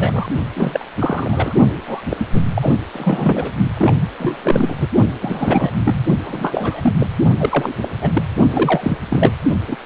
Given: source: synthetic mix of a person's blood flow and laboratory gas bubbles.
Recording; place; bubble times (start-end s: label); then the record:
Doppler ultrasound of blood flow; precordium
0.00-0.27 s: bubbles
0.55-0.85 s: bubbles
0.97-1.54 s: bubbles
1.85-2.01 s: bubbles
2.11-2.27 s: bubbles
2.34-2.41 s: bubbles
2.55-2.77 s: bubbles
2.93-3.52 s: bubbles
3.77-3.94 s: bubbles
4.19-4.75 s: bubbles
4.81-4.88 s: bubbles
5.21-5.71 s: bubbles
5.84-6.00 s: bubbles
6.23-6.96 s: bubbles
7.00-7.07 s: bubbles
7.39-7.74 s: bubbles
7.82-7.89 s: bubbles
8.02-8.11 s: bubbles
8.13-8.22 s: bubbles
8.52-8.97 s: bubbles
9.10-9.33 s: bubbles
9.68-9.76 s: bubbles
From the record:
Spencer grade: 3 (all of the cardiac periods contain showers or single bubble signals, but not dominating or overriding the cardiac motion signals); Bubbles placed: only in the low amplitude regions of the cardiac cycle